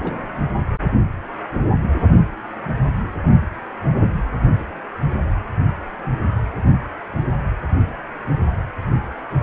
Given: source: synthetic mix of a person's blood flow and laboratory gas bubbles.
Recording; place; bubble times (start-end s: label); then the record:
Doppler ultrasound of blood flow; precordium
0.04-0.27 s: bubbles
From the record:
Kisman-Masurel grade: 211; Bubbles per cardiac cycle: several, 3 to 8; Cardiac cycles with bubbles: 1 to 10%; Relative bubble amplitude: barely perceptible (0.100 to 0.250); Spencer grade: 1 (occasional bubble signal discernible with the cardiac motion signal, with majority of cardiac periods free of bubbles); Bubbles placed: anywhere in the cardiac cycle